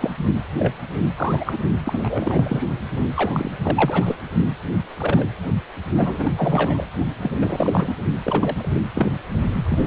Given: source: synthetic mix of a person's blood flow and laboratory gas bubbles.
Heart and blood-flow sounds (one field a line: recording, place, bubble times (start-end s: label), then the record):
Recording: Doppler ultrasound of blood flow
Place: precordium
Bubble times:
0.01-0.10 s: bubbles
0.59-0.73 s: bubbles
1.16-1.59 s: bubbles
1.85-2.62 s: bubbles
3.16-3.50 s: bubbles
3.62-4.16 s: bubbles
4.97-5.29 s: bubbles
5.97-6.33 s: bubbles
6.37-6.86 s: bubbles
7.21-7.93 s: bubbles
8.23-8.70 s: bubbles
8.75-8.80 s: bubbles
8.95-9.10 s: bubbles
9.69-9.87 s: bubbles
From the record:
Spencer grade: 3 (all of the cardiac periods contain showers or single bubble signals, but not dominating or overriding the cardiac motion signals)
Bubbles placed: only in the low amplitude regions of the cardiac cycle